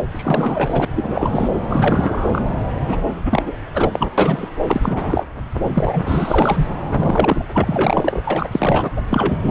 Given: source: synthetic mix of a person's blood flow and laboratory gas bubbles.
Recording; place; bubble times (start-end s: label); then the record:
Doppler ultrasound of blood flow; subclavian vein
0.14-0.85 s: bubbles
0.96-1.51 s: bubbles
1.69-2.42 s: bubbles
2.87-2.98 s: bubbles
3.08-3.13 s: bubbles
3.25-3.56 s: bubbles
3.74-4.08 s: bubbles
4.17-4.49 s: bubbles
4.67-5.26 s: bubbles
5.70-6.69 s: bubbles
6.92-7.47 s: bubbles
7.54-8.22 s: bubbles
8.25-8.47 s: bubbles
8.52-8.90 s: bubbles
8.96-9.01 s: bubbles
9.10-9.51 s: bubbles
From the record:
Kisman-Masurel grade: 342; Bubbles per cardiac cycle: rolling drumbeat, 9 or more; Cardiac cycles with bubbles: 100%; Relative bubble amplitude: moderate (0.250 to 0.450); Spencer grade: 3 (all of the cardiac periods contain showers or single bubble signals, but not dominating or overriding the cardiac motion signals); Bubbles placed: anywhere in the cardiac cycle